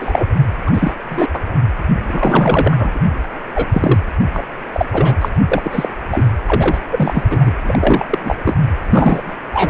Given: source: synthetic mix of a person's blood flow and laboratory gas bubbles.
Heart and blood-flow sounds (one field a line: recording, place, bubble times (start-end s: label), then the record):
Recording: Doppler ultrasound of blood flow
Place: precordium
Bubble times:
0.00-0.27 s: bubbles
0.67-0.70 s: bubbles
0.73-0.94 s: bubbles
1.10-1.28 s: bubbles
1.33-1.40 s: bubbles
2.06-2.99 s: bubbles
3.55-3.67 s: bubbles
3.72-4.00 s: bubbles
4.33-4.42 s: bubbles
4.73-4.86 s: bubbles
4.92-5.13 s: bubbles
5.21-5.29 s: bubbles
5.51-5.88 s: bubbles
6.11-6.27 s: bubbles
6.46-6.79 s: bubbles
6.92-7.23 s: bubbles
7.30-7.53 s: bubbles
7.64-8.35 s: bubbles
8.44-8.59 s: bubbles
8.82-9.32 s: bubbles
9.53-9.70 s: bubbles
From the record:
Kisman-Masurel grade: 343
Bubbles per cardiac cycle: rolling drumbeat, 9 or more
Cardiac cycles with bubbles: 100%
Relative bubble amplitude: loud (0.450 to 0.775)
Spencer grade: 3 (all of the cardiac periods contain showers or single bubble signals, but not dominating or overriding the cardiac motion signals)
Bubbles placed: anywhere in the cardiac cycle